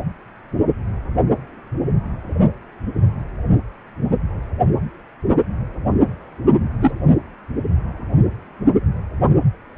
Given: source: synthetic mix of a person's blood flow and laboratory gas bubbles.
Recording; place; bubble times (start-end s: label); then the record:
Doppler ultrasound of blood flow; precordium
6.81-6.92 s: bubbles
From the record:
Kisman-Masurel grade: 113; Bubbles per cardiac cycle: 1 to 2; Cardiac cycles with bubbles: 1 to 10%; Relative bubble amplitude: loud (0.450 to 0.775); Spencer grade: 1 (occasional bubble signal discernible with the cardiac motion signal, with majority of cardiac periods free of bubbles); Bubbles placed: only in the low amplitude regions of the cardiac cycle